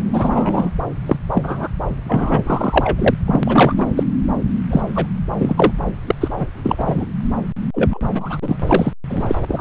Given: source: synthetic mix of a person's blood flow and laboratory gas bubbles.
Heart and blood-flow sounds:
Doppler ultrasound of blood flow; subclavian vein
0.00-0.70 s: bubbles
1.06-1.17 s: bubbles
1.31-1.68 s: bubbles
2.07-3.11 s: bubbles
3.26-3.94 s: bubbles
3.96-4.04 s: bubbles
4.70-4.83 s: bubbles
4.95-5.07 s: bubbles
5.39-5.54 s: bubbles
5.57-5.71 s: bubbles
6.07-6.15 s: bubbles
6.20-6.29 s: bubbles
6.36-6.49 s: bubbles
6.63-7.06 s: bubbles
7.74-8.00 s: bubbles
8.13-8.38 s: bubbles
8.41-8.56 s: bubbles
8.67-8.92 s: bubbles
9.09-9.35 s: bubbles
9.48-9.61 s: bubbles
From the record:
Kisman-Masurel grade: 243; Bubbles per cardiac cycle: several, 3 to 8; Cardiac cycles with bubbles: 100%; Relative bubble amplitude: loud (0.450 to 0.775); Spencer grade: 3 (all of the cardiac periods contain showers or single bubble signals, but not dominating or overriding the cardiac motion signals); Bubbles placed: anywhere in the cardiac cycle

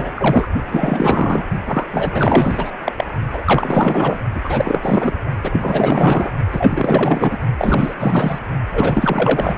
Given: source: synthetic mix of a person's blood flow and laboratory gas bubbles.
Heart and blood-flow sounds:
Doppler ultrasound of blood flow; precordium
0.00-0.12 s: bubbles
0.14-0.48 s: bubbles
0.66-1.45 s: bubbles
1.66-1.85 s: bubbles
1.93-2.71 s: bubbles
2.85-2.92 s: bubbles
2.97-3.04 s: bubbles
3.33-4.20 s: bubbles
4.35-4.41 s: bubbles
4.44-5.13 s: bubbles
5.43-6.31 s: bubbles
6.52-7.38 s: bubbles
7.58-7.94 s: bubbles
8.00-8.39 s: bubbles
8.73-9.55 s: bubbles
From the record:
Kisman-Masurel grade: 444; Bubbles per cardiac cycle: continuous sound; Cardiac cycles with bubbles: 100%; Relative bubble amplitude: maximal (0.775 to 0.999); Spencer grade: 4 (maximum detectable bubble signal sounding continuously throughout systole and diastole of every cardiac period, and overriding the amplitude of the normal cardiac signals); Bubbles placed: only in the low amplitude regions of the cardiac cycle

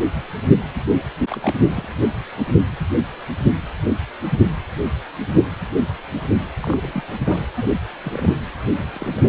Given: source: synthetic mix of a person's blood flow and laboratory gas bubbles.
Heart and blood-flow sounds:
Doppler ultrasound of blood flow; precordium
1.28-1.88 s: bubbles
6.61-7.04 s: bubbles
7.25-7.46 s: bubbles
7.56-7.66 s: bubbles
8.04-8.33 s: bubbles
8.77-8.84 s: bubbles
8.94-9.29 s: bubbles
From the record:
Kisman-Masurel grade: 221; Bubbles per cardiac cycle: several, 3 to 8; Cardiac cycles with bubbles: 10 to 50%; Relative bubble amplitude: barely perceptible (0.100 to 0.250); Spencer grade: 2 (many but less than half of the cardiac periods contain bubble signals, singularly or in groups); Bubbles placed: anywhere in the cardiac cycle

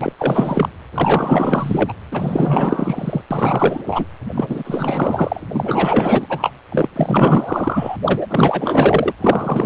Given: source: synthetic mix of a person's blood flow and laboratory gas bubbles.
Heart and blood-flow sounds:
Doppler ultrasound of blood flow; precordium
0.01-0.12 s: bubbles
0.18-0.69 s: bubbles
0.94-1.94 s: bubbles
2.11-3.21 s: bubbles
3.31-3.83 s: bubbles
3.87-4.05 s: bubbles
4.34-5.41 s: bubbles
5.53-6.52 s: bubbles
6.72-6.88 s: bubbles
6.96-7.96 s: bubbles
8.05-9.12 s: bubbles
9.21-9.66 s: bubbles
From the record:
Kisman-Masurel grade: 444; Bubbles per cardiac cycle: continuous sound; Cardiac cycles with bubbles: 100%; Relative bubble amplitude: maximal (0.775 to 0.999); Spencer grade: 4 (maximum detectable bubble signal sounding continuously throughout systole and diastole of every cardiac period, and overriding the amplitude of the normal cardiac signals); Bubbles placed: anywhere in the cardiac cycle

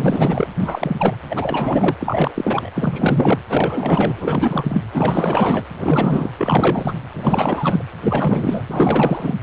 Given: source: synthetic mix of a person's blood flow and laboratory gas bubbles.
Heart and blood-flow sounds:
Doppler ultrasound of blood flow; precordium
0.00-0.47 s: bubbles
0.60-0.96 s: bubbles
0.98-1.16 s: bubbles
1.29-1.95 s: bubbles
2.00-2.71 s: bubbles
2.75-3.42 s: bubbles
3.49-4.82 s: bubbles
4.92-5.65 s: bubbles
5.77-6.32 s: bubbles
6.38-6.96 s: bubbles
7.12-7.84 s: bubbles
8.04-8.63 s: bubbles
8.67-9.35 s: bubbles
From the record:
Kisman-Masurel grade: 444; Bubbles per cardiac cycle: continuous sound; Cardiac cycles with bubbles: 100%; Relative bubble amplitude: maximal (0.775 to 0.999); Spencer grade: 4 (maximum detectable bubble signal sounding continuously throughout systole and diastole of every cardiac period, and overriding the amplitude of the normal cardiac signals); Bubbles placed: anywhere in the cardiac cycle

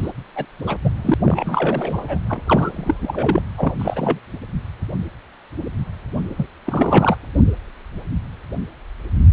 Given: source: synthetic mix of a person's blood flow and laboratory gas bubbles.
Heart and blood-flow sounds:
Doppler ultrasound of blood flow; precordium
0.00-0.11 s: bubbles
0.35-0.45 s: bubbles
0.64-0.77 s: bubbles
0.85-0.89 s: bubbles
1.02-1.14 s: bubbles
1.25-2.20 s: bubbles
2.29-2.41 s: bubbles
2.48-3.42 s: bubbles
3.57-3.73 s: bubbles
3.79-4.20 s: bubbles
6.37-6.48 s: bubbles
6.65-7.16 s: bubbles
From the record:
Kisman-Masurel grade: 332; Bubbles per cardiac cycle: rolling drumbeat, 9 or more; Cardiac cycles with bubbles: 50 to 99%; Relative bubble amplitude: moderate (0.250 to 0.450); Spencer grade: 3 (all of the cardiac periods contain showers or single bubble signals, but not dominating or overriding the cardiac motion signals); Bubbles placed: anywhere in the cardiac cycle

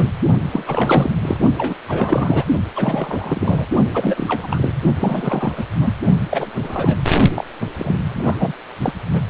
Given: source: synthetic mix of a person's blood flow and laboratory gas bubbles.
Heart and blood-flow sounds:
Doppler ultrasound of blood flow; precordium
0.00-0.09 s: bubbles
0.52-1.10 s: bubbles
1.21-1.37 s: bubbles
1.57-1.75 s: bubbles
1.88-2.44 s: bubbles
2.75-3.67 s: bubbles
3.94-4.72 s: bubbles
5.00-5.66 s: bubbles
5.81-5.94 s: bubbles
6.31-6.51 s: bubbles
6.54-6.97 s: bubbles
7.35-7.44 s: bubbles
7.61-7.66 s: bubbles
7.76-8.53 s: bubbles
8.81-8.93 s: bubbles
9.13-9.22 s: bubbles
From the record:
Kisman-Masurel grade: 342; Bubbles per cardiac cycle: rolling drumbeat, 9 or more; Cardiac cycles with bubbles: 100%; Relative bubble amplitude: moderate (0.250 to 0.450); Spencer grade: 3 (all of the cardiac periods contain showers or single bubble signals, but not dominating or overriding the cardiac motion signals); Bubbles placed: only in the low amplitude regions of the cardiac cycle

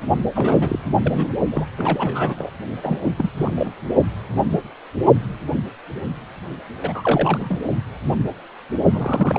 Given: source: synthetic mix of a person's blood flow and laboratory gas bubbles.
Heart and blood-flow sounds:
Doppler ultrasound of blood flow; precordium
0.35-0.80 s: bubbles
0.98-1.29 s: bubbles
1.51-1.65 s: bubbles
1.77-2.50 s: bubbles
2.83-3.12 s: bubbles
3.18-3.30 s: bubbles
3.38-3.73 s: bubbles
6.82-7.59 s: bubbles
8.93-9.39 s: bubbles
From the record:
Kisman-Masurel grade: 332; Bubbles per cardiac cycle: rolling drumbeat, 9 or more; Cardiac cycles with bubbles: 50 to 99%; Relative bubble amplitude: moderate (0.250 to 0.450); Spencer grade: 3 (all of the cardiac periods contain showers or single bubble signals, but not dominating or overriding the cardiac motion signals); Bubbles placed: only in the low amplitude regions of the cardiac cycle

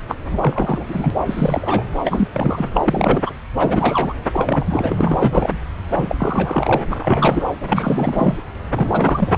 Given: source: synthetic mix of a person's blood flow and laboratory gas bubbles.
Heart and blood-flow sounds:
Doppler ultrasound of blood flow; subclavian vein
0.08-0.16 s: bubbles
0.31-1.10 s: bubbles
1.26-1.84 s: bubbles
2.04-2.28 s: bubbles
2.33-2.69 s: bubbles
2.74-3.22 s: bubbles
3.25-3.30 s: bubbles
3.58-4.14 s: bubbles
4.33-5.59 s: bubbles
5.98-6.16 s: bubbles
6.18-6.83 s: bubbles
6.91-6.96 s: bubbles
7.00-7.46 s: bubbles
7.61-8.38 s: bubbles
8.73-9.38 s: bubbles
From the record:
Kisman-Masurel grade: 343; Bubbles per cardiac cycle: rolling drumbeat, 9 or more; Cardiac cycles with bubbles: 100%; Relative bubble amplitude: loud (0.450 to 0.775); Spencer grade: 3 (all of the cardiac periods contain showers or single bubble signals, but not dominating or overriding the cardiac motion signals); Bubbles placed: anywhere in the cardiac cycle

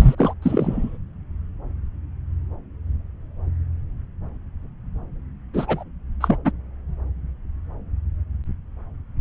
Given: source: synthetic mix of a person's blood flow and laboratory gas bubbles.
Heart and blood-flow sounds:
Doppler ultrasound of blood flow; subclavian vein
0.01-0.15 s: bubbles
0.18-0.34 s: bubbles
0.42-0.97 s: bubbles
5.54-5.83 s: bubbles
6.21-6.38 s: bubbles
6.45-6.52 s: bubbles
From the record:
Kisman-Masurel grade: 222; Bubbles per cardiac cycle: several, 3 to 8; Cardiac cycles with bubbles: 10 to 50%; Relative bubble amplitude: moderate (0.250 to 0.450); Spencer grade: 2 (many but less than half of the cardiac periods contain bubble signals, singularly or in groups); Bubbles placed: anywhere in the cardiac cycle

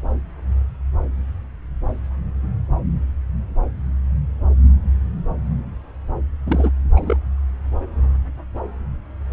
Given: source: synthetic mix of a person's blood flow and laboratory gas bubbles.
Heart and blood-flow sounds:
Doppler ultrasound of blood flow; subclavian vein
6.46-6.71 s: bubbles
6.96-7.17 s: bubbles
From the record:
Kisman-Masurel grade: 222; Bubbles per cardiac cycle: several, 3 to 8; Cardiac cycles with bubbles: 10 to 50%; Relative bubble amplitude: moderate (0.250 to 0.450); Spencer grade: 2 (many but less than half of the cardiac periods contain bubble signals, singularly or in groups); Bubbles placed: anywhere in the cardiac cycle

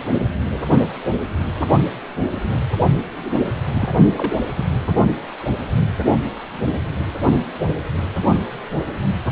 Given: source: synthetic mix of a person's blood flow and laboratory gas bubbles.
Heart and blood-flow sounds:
Doppler ultrasound of blood flow; precordium
3.73-4.04 s: bubbles
4.12-4.38 s: bubbles
4.55-4.66 s: bubbles
From the record:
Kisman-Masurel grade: 212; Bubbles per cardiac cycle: several, 3 to 8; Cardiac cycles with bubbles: 1 to 10%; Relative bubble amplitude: moderate (0.250 to 0.450); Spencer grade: 1 (occasional bubble signal discernible with the cardiac motion signal, with majority of cardiac periods free of bubbles); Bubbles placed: anywhere in the cardiac cycle

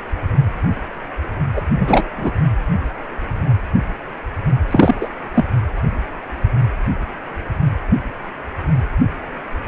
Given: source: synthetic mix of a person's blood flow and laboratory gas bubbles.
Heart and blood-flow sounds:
Doppler ultrasound of blood flow; precordium
1.54-1.62 s: bubbles
1.79-2.06 s: bubbles
2.17-2.31 s: bubbles
4.67-5.09 s: bubbles
5.34-5.45 s: bubbles
From the record:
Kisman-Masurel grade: 223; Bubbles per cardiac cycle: several, 3 to 8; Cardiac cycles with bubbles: 10 to 50%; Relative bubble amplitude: loud (0.450 to 0.775); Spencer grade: 2 (many but less than half of the cardiac periods contain bubble signals, singularly or in groups); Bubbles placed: anywhere in the cardiac cycle

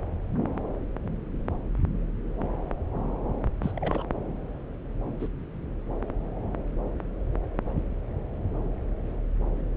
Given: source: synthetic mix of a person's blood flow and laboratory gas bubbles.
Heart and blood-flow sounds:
Doppler ultrasound of blood flow; subclavian vein
3.62-3.72 s: bubbles
3.77-4.04 s: bubbles
5.20-5.29 s: bubbles
From the record:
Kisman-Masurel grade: 221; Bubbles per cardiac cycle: several, 3 to 8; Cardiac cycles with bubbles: 10 to 50%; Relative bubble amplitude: barely perceptible (0.100 to 0.250); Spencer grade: 2 (many but less than half of the cardiac periods contain bubble signals, singularly or in groups); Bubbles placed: anywhere in the cardiac cycle

